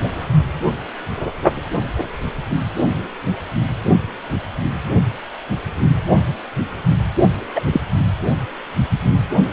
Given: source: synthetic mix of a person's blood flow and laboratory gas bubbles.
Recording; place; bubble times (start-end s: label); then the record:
Doppler ultrasound of blood flow; precordium
7.55-7.61 s: bubbles
7.72-7.80 s: bubbles
From the record:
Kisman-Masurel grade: 113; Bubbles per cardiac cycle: 1 to 2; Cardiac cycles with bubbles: 1 to 10%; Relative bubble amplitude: loud (0.450 to 0.775); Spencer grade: 1 (occasional bubble signal discernible with the cardiac motion signal, with majority of cardiac periods free of bubbles); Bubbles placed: only in the low amplitude regions of the cardiac cycle